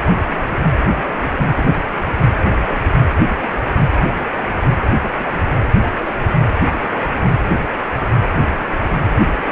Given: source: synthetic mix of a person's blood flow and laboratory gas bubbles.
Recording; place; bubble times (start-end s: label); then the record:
Doppler ultrasound of blood flow; precordium
1.57-1.64 s: bubbles
From the record:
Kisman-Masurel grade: 112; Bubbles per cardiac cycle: 1 to 2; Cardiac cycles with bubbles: 1 to 10%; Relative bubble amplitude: moderate (0.250 to 0.450); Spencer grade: 1 (occasional bubble signal discernible with the cardiac motion signal, with majority of cardiac periods free of bubbles); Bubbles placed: anywhere in the cardiac cycle